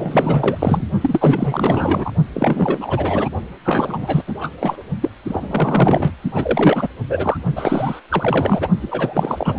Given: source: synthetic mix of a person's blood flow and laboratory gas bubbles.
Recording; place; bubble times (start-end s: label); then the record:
Doppler ultrasound of blood flow; precordium
0.00-0.84 s: bubbles
1.01-2.11 s: bubbles
2.33-3.29 s: bubbles
3.65-4.23 s: bubbles
4.27-4.33 s: bubbles
4.41-4.50 s: bubbles
4.59-4.76 s: bubbles
5.01-5.09 s: bubbles
5.28-6.12 s: bubbles
6.34-6.88 s: bubbles
7.09-7.37 s: bubbles
7.55-8.01 s: bubbles
8.09-8.68 s: bubbles
8.82-9.59 s: bubbles
From the record:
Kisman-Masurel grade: 444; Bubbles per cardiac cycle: continuous sound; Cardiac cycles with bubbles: 100%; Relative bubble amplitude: maximal (0.775 to 0.999); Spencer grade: 4 (maximum detectable bubble signal sounding continuously throughout systole and diastole of every cardiac period, and overriding the amplitude of the normal cardiac signals); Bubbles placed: only in the low amplitude regions of the cardiac cycle